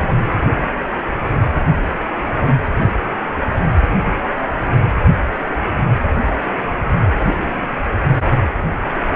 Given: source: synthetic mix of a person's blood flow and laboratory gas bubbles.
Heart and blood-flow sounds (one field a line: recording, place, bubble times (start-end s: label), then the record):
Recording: Doppler ultrasound of blood flow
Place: precordium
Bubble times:
0.00-0.25 s: bubbles
From the record:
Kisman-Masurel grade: 112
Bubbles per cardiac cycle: 1 to 2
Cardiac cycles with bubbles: 1 to 10%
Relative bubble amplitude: moderate (0.250 to 0.450)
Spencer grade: 1 (occasional bubble signal discernible with the cardiac motion signal, with majority of cardiac periods free of bubbles)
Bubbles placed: anywhere in the cardiac cycle